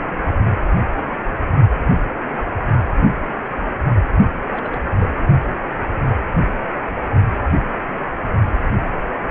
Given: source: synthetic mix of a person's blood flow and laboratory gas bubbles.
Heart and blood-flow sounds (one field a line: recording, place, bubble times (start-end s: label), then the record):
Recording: Doppler ultrasound of blood flow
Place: precordium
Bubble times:
4.52-4.81 s: bubbles
5.00-5.08 s: bubbles
From the record:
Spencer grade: 1 (occasional bubble signal discernible with the cardiac motion signal, with majority of cardiac periods free of bubbles)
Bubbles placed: only in the low amplitude regions of the cardiac cycle